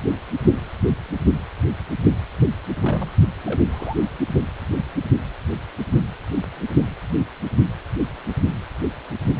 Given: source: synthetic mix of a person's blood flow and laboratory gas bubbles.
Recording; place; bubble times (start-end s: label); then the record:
Doppler ultrasound of blood flow; precordium
2.80-3.11 s: bubbles
3.46-3.62 s: bubbles
3.71-3.96 s: bubbles
From the record:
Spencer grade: 2 (many but less than half of the cardiac periods contain bubble signals, singularly or in groups); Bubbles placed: only in the low amplitude regions of the cardiac cycle